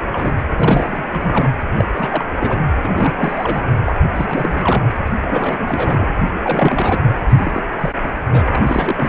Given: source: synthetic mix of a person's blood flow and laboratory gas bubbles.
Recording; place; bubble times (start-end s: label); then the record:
Doppler ultrasound of blood flow; precordium
0.12-0.33 s: bubbles
0.39-0.44 s: bubbles
0.59-1.08 s: bubbles
1.12-1.49 s: bubbles
1.76-1.90 s: bubbles
1.93-2.24 s: bubbles
2.39-2.70 s: bubbles
2.83-3.12 s: bubbles
3.17-3.62 s: bubbles
3.84-3.96 s: bubbles
4.14-4.83 s: bubbles
5.30-6.11 s: bubbles
6.42-7.00 s: bubbles
7.29-7.64 s: bubbles
7.79-7.92 s: bubbles
8.04-8.10 s: bubbles
8.31-8.42 s: bubbles
8.52-9.09 s: bubbles
From the record:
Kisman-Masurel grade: 342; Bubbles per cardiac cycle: rolling drumbeat, 9 or more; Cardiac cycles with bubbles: 100%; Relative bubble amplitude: moderate (0.250 to 0.450); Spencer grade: 3 (all of the cardiac periods contain showers or single bubble signals, but not dominating or overriding the cardiac motion signals); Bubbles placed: anywhere in the cardiac cycle